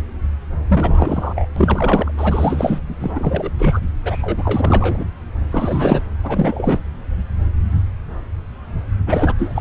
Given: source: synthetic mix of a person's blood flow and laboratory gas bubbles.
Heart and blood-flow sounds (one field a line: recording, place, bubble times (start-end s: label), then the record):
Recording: Doppler ultrasound of blood flow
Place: subclavian vein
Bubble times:
0.69-1.48 s: bubbles
1.56-2.12 s: bubbles
2.17-2.80 s: bubbles
3.01-3.51 s: bubbles
3.58-3.80 s: bubbles
4.03-5.04 s: bubbles
5.51-6.01 s: bubbles
6.23-6.79 s: bubbles
9.06-9.35 s: bubbles
9.38-9.61 s: bubbles
From the record:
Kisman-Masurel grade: 333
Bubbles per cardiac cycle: rolling drumbeat, 9 or more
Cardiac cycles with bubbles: 50 to 99%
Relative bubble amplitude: loud (0.450 to 0.775)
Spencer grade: 3 (all of the cardiac periods contain showers or single bubble signals, but not dominating or overriding the cardiac motion signals)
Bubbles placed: anywhere in the cardiac cycle